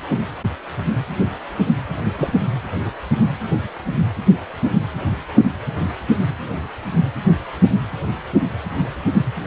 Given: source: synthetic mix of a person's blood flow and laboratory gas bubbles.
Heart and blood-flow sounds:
Doppler ultrasound of blood flow; precordium
2.18-2.33 s: bubbles
From the record:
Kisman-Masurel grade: 112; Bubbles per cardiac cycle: 1 to 2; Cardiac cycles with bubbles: 1 to 10%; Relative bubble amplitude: moderate (0.250 to 0.450); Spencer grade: 1 (occasional bubble signal discernible with the cardiac motion signal, with majority of cardiac periods free of bubbles); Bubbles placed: anywhere in the cardiac cycle

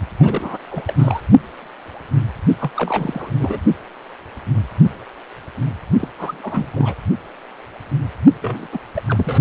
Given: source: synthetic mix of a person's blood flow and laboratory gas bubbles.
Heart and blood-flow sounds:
Doppler ultrasound of blood flow; precordium
0.19-0.57 s: bubbles
0.70-0.94 s: bubbles
0.98-1.21 s: bubbles
2.60-2.70 s: bubbles
2.76-3.60 s: bubbles
6.00-6.08 s: bubbles
6.18-6.70 s: bubbles
6.72-6.94 s: bubbles
8.41-8.67 s: bubbles
8.72-8.78 s: bubbles
8.96-9.02 s: bubbles
9.08-9.41 s: bubbles
From the record:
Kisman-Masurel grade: 332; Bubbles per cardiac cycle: rolling drumbeat, 9 or more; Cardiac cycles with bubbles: 50 to 99%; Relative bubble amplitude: moderate (0.250 to 0.450); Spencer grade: 3 (all of the cardiac periods contain showers or single bubble signals, but not dominating or overriding the cardiac motion signals); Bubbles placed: only in the low amplitude regions of the cardiac cycle

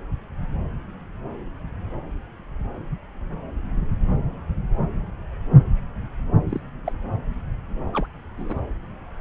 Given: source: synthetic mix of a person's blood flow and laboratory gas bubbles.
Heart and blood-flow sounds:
Doppler ultrasound of blood flow; subclavian vein
6.49-6.60 s: bubbles
6.86-6.92 s: bubbles
7.93-8.06 s: bubbles
8.38-8.60 s: bubbles
From the record:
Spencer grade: 2 (many but less than half of the cardiac periods contain bubble signals, singularly or in groups); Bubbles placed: anywhere in the cardiac cycle

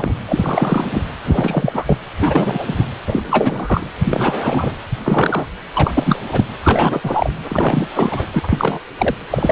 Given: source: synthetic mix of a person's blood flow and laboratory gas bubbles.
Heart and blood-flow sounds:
Doppler ultrasound of blood flow; precordium
0.00-0.14 s: bubbles
0.26-1.02 s: bubbles
1.24-1.98 s: bubbles
2.18-2.84 s: bubbles
3.07-3.83 s: bubbles
4.04-4.74 s: bubbles
5.04-5.47 s: bubbles
5.73-6.20 s: bubbles
6.28-6.46 s: bubbles
6.64-7.00 s: bubbles
7.03-7.30 s: bubbles
7.48-7.87 s: bubbles
7.95-8.26 s: bubbles
8.33-8.79 s: bubbles
8.98-9.16 s: bubbles
9.30-9.52 s: bubbles
From the record:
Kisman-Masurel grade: 343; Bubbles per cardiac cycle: rolling drumbeat, 9 or more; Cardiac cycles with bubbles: 100%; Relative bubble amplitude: loud (0.450 to 0.775); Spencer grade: 3 (all of the cardiac periods contain showers or single bubble signals, but not dominating or overriding the cardiac motion signals); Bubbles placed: anywhere in the cardiac cycle

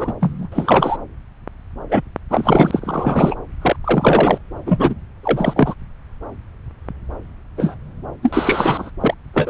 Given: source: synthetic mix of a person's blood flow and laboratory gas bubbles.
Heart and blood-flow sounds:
Doppler ultrasound of blood flow; subclavian vein
0.00-0.14 s: bubbles
0.20-0.48 s: bubbles
0.52-0.97 s: bubbles
1.89-2.02 s: bubbles
2.29-3.35 s: bubbles
3.61-3.76 s: bubbles
3.84-4.38 s: bubbles
4.66-4.95 s: bubbles
5.23-5.74 s: bubbles
7.57-7.75 s: bubbles
8.22-8.91 s: bubbles
9.00-9.14 s: bubbles
9.34-9.50 s: bubbles
From the record:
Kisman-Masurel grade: 333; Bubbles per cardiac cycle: rolling drumbeat, 9 or more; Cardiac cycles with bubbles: 50 to 99%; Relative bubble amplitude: loud (0.450 to 0.775); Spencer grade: 3 (all of the cardiac periods contain showers or single bubble signals, but not dominating or overriding the cardiac motion signals); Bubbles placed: anywhere in the cardiac cycle

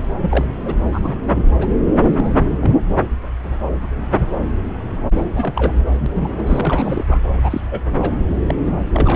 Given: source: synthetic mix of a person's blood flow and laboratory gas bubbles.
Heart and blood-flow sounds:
Doppler ultrasound of blood flow; subclavian vein
0.00-0.05 s: bubbles
0.22-0.47 s: bubbles
0.65-0.76 s: bubbles
0.93-1.17 s: bubbles
1.27-1.34 s: bubbles
1.60-1.68 s: bubbles
1.96-2.30 s: bubbles
2.33-2.44 s: bubbles
2.60-2.81 s: bubbles
5.17-5.73 s: bubbles
5.93-6.06 s: bubbles
6.13-6.29 s: bubbles
6.45-7.04 s: bubbles
7.07-7.20 s: bubbles
7.39-7.60 s: bubbles
7.71-7.80 s: bubbles
7.97-8.15 s: bubbles
8.48-8.54 s: bubbles
8.66-8.72 s: bubbles
8.93-9.15 s: bubbles
From the record:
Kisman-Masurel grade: 232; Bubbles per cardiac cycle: several, 3 to 8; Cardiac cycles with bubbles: 50 to 99%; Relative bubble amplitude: moderate (0.250 to 0.450); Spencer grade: 3 (all of the cardiac periods contain showers or single bubble signals, but not dominating or overriding the cardiac motion signals); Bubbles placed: anywhere in the cardiac cycle

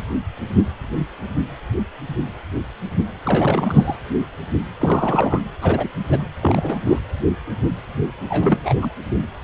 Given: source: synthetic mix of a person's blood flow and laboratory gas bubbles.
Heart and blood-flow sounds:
Doppler ultrasound of blood flow; precordium
3.25-3.96 s: bubbles
4.79-5.40 s: bubbles
5.61-5.89 s: bubbles
6.09-6.27 s: bubbles
6.42-6.78 s: bubbles
6.84-6.99 s: bubbles
8.29-8.74 s: bubbles
8.81-8.89 s: bubbles
From the record:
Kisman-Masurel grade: 222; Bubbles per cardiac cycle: several, 3 to 8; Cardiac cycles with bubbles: 10 to 50%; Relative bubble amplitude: moderate (0.250 to 0.450); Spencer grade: 2 (many but less than half of the cardiac periods contain bubble signals, singularly or in groups); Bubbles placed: anywhere in the cardiac cycle

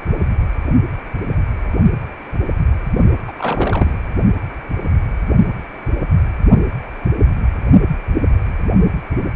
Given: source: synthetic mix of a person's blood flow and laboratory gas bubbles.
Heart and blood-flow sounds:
Doppler ultrasound of blood flow; precordium
3.27-3.32 s: bubbles
3.38-3.92 s: bubbles
From the record:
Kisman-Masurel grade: 222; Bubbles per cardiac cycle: several, 3 to 8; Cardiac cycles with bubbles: 10 to 50%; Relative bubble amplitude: moderate (0.250 to 0.450); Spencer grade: 2 (many but less than half of the cardiac periods contain bubble signals, singularly or in groups); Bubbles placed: only in the low amplitude regions of the cardiac cycle

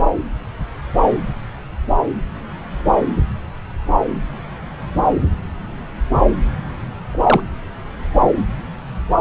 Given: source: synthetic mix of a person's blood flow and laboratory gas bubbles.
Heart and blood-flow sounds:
Doppler ultrasound of blood flow; subclavian vein
7.12-7.40 s: bubbles
From the record:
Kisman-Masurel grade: 123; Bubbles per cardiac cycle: 1 to 2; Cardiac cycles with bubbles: 10 to 50%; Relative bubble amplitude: loud (0.450 to 0.775); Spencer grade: 2 (many but less than half of the cardiac periods contain bubble signals, singularly or in groups); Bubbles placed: anywhere in the cardiac cycle

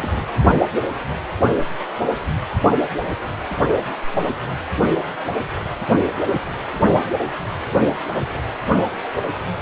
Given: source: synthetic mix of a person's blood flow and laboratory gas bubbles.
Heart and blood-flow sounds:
Doppler ultrasound of blood flow; precordium
0.00-0.26 s: bubbles
From the record:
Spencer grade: 1 (occasional bubble signal discernible with the cardiac motion signal, with majority of cardiac periods free of bubbles); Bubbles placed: only in the low amplitude regions of the cardiac cycle

